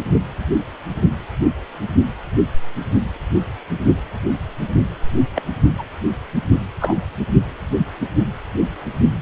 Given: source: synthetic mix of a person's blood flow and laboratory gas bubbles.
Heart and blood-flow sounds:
Doppler ultrasound of blood flow; precordium
5.34-5.42 s: bubbles
5.78-5.82 s: bubbles
6.80-6.94 s: bubbles
From the record:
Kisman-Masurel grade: 122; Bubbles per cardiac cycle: 1 to 2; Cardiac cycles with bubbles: 10 to 50%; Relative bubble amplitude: moderate (0.250 to 0.450); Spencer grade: 2 (many but less than half of the cardiac periods contain bubble signals, singularly or in groups); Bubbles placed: anywhere in the cardiac cycle

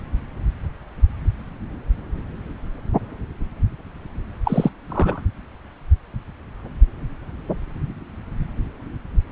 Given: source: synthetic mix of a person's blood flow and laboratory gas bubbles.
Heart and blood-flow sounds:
Doppler ultrasound of blood flow; subclavian vein
4.44-4.70 s: bubbles
4.89-5.21 s: bubbles
From the record:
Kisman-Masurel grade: 213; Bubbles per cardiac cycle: several, 3 to 8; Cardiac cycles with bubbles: 1 to 10%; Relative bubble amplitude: loud (0.450 to 0.775); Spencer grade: 1 (occasional bubble signal discernible with the cardiac motion signal, with majority of cardiac periods free of bubbles); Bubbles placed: anywhere in the cardiac cycle

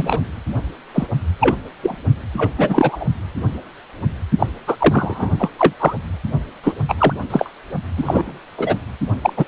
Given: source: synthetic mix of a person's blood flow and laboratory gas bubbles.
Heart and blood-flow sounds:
Doppler ultrasound of blood flow; precordium
0.00-0.20 s: bubbles
0.94-1.06 s: bubbles
1.40-1.55 s: bubbles
1.83-1.95 s: bubbles
2.37-2.50 s: bubbles
2.58-3.04 s: bubbles
4.38-4.46 s: bubbles
4.67-4.76 s: bubbles
4.79-5.30 s: bubbles
5.39-5.50 s: bubbles
5.58-5.74 s: bubbles
5.79-5.94 s: bubbles
6.63-6.73 s: bubbles
6.88-6.95 s: bubbles
6.98-7.14 s: bubbles
7.30-7.52 s: bubbles
7.97-8.40 s: bubbles
8.58-8.76 s: bubbles
9.21-9.33 s: bubbles
9.37-9.48 s: bubbles
From the record:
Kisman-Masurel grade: 233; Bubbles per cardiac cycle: several, 3 to 8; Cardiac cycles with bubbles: 50 to 99%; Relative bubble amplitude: loud (0.450 to 0.775); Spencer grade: 3 (all of the cardiac periods contain showers or single bubble signals, but not dominating or overriding the cardiac motion signals); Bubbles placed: only in the low amplitude regions of the cardiac cycle

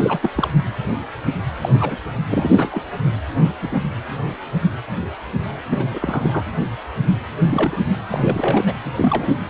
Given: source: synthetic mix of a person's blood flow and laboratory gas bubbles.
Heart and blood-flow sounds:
Doppler ultrasound of blood flow; precordium
0.00-0.30 s: bubbles
0.35-0.50 s: bubbles
1.62-1.69 s: bubbles
1.72-1.96 s: bubbles
2.30-2.83 s: bubbles
3.44-3.52 s: bubbles
3.62-3.76 s: bubbles
5.71-5.84 s: bubbles
5.91-6.43 s: bubbles
7.38-7.77 s: bubbles
8.08-8.77 s: bubbles
8.95-9.35 s: bubbles
From the record:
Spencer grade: 3 (all of the cardiac periods contain showers or single bubble signals, but not dominating or overriding the cardiac motion signals); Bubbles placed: anywhere in the cardiac cycle

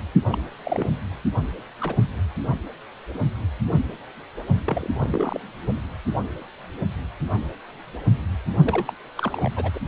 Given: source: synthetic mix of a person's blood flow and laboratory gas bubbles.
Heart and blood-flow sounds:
Doppler ultrasound of blood flow; precordium
0.27-0.38 s: bubbles
0.64-0.88 s: bubbles
1.80-1.96 s: bubbles
4.65-4.89 s: bubbles
4.92-5.40 s: bubbles
8.64-8.92 s: bubbles
9.16-9.51 s: bubbles
9.55-9.80 s: bubbles
From the record:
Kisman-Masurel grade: 222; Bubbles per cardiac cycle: several, 3 to 8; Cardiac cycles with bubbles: 10 to 50%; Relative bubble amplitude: moderate (0.250 to 0.450); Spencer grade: 2 (many but less than half of the cardiac periods contain bubble signals, singularly or in groups); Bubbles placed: only in the low amplitude regions of the cardiac cycle

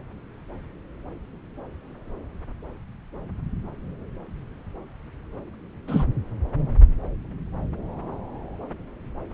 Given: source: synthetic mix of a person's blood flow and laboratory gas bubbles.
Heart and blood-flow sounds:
Doppler ultrasound of blood flow; subclavian vein
5.88-6.04 s: bubbles
From the record:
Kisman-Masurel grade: 123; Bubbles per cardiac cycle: 1 to 2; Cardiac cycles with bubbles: 10 to 50%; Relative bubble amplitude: loud (0.450 to 0.775); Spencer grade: 2 (many but less than half of the cardiac periods contain bubble signals, singularly or in groups); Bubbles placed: anywhere in the cardiac cycle

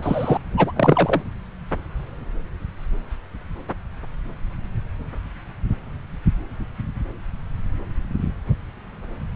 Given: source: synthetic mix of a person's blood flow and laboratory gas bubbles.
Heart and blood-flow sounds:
Doppler ultrasound of blood flow; subclavian vein
0.00-0.38 s: bubbles
0.56-0.72 s: bubbles
0.76-1.22 s: bubbles
From the record:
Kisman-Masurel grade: 223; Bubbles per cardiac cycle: several, 3 to 8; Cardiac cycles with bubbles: 10 to 50%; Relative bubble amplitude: loud (0.450 to 0.775); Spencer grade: 2 (many but less than half of the cardiac periods contain bubble signals, singularly or in groups); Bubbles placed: anywhere in the cardiac cycle

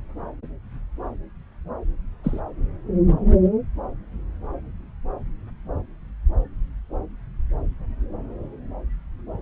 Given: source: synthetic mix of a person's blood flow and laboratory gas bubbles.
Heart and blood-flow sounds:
Doppler ultrasound of blood flow; subclavian vein
2.24-2.41 s: bubbles
From the record:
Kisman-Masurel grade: 111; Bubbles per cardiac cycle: 1 to 2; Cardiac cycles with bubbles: 1 to 10%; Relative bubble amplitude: barely perceptible (0.100 to 0.250); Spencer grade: 1 (occasional bubble signal discernible with the cardiac motion signal, with majority of cardiac periods free of bubbles); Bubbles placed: anywhere in the cardiac cycle

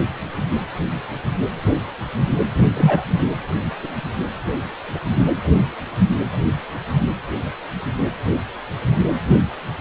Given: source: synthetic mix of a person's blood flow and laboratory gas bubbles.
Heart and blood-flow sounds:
Doppler ultrasound of blood flow; precordium
2.75-3.06 s: bubbles
From the record:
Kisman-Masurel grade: 123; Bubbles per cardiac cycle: 1 to 2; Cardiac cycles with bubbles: 10 to 50%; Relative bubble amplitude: loud (0.450 to 0.775); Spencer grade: 2 (many but less than half of the cardiac periods contain bubble signals, singularly or in groups); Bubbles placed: anywhere in the cardiac cycle

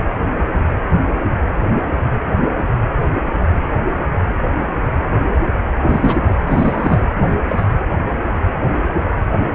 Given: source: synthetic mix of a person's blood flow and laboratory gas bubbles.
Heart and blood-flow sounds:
Doppler ultrasound of blood flow; precordium
5.82-6.26 s: bubbles
6.46-7.01 s: bubbles
7.18-7.36 s: bubbles
7.47-7.64 s: bubbles
From the record:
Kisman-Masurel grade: 223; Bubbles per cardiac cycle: several, 3 to 8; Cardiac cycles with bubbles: 10 to 50%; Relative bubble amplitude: loud (0.450 to 0.775); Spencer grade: 2 (many but less than half of the cardiac periods contain bubble signals, singularly or in groups); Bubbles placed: anywhere in the cardiac cycle

